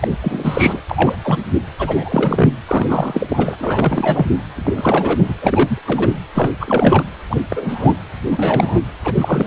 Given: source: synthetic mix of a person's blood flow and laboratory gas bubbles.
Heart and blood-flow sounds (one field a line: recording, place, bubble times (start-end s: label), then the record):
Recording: Doppler ultrasound of blood flow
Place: precordium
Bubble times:
0.01-0.17 s: bubbles
0.21-0.82 s: bubbles
0.90-1.17 s: bubbles
1.23-1.38 s: bubbles
1.78-2.53 s: bubbles
2.67-3.56 s: bubbles
3.60-4.31 s: bubbles
4.56-5.22 s: bubbles
5.25-5.34 s: bubbles
5.41-5.79 s: bubbles
5.87-6.14 s: bubbles
6.34-6.51 s: bubbles
6.60-7.03 s: bubbles
7.29-7.42 s: bubbles
7.50-7.97 s: bubbles
8.30-8.81 s: bubbles
9.04-9.47 s: bubbles
From the record:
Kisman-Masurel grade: 343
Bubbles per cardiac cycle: rolling drumbeat, 9 or more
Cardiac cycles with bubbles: 100%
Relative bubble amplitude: loud (0.450 to 0.775)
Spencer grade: 3 (all of the cardiac periods contain showers or single bubble signals, but not dominating or overriding the cardiac motion signals)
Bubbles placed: anywhere in the cardiac cycle